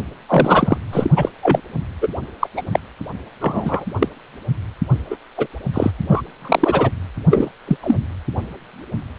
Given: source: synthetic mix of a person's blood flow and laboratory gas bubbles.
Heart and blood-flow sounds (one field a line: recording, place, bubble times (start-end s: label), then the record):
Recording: Doppler ultrasound of blood flow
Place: precordium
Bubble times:
0.28-0.78 s: bubbles
0.92-1.10 s: bubbles
1.16-1.29 s: bubbles
1.43-1.61 s: bubbles
2.01-2.08 s: bubbles
2.40-2.47 s: bubbles
2.56-2.62 s: bubbles
2.71-2.79 s: bubbles
3.40-3.85 s: bubbles
3.99-4.08 s: bubbles
5.10-5.17 s: bubbles
5.38-5.47 s: bubbles
5.73-5.91 s: bubbles
6.08-6.21 s: bubbles
6.41-6.91 s: bubbles
7.30-7.50 s: bubbles
7.67-7.77 s: bubbles
7.83-7.96 s: bubbles
From the record:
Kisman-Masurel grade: 233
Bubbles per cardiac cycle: several, 3 to 8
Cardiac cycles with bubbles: 50 to 99%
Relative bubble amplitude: loud (0.450 to 0.775)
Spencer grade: 3 (all of the cardiac periods contain showers or single bubble signals, but not dominating or overriding the cardiac motion signals)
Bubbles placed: anywhere in the cardiac cycle